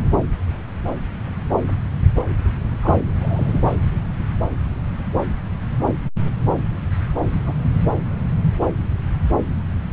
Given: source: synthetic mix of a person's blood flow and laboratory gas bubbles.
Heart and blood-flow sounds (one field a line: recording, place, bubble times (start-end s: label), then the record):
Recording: Doppler ultrasound of blood flow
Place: subclavian vein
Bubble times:
2.82-2.99 s: bubbles
3.21-3.60 s: bubbles
7.46-7.54 s: bubbles
From the record:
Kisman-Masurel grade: 121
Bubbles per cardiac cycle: 1 to 2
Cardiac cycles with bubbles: 10 to 50%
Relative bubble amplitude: barely perceptible (0.100 to 0.250)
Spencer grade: 2 (many but less than half of the cardiac periods contain bubble signals, singularly or in groups)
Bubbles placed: anywhere in the cardiac cycle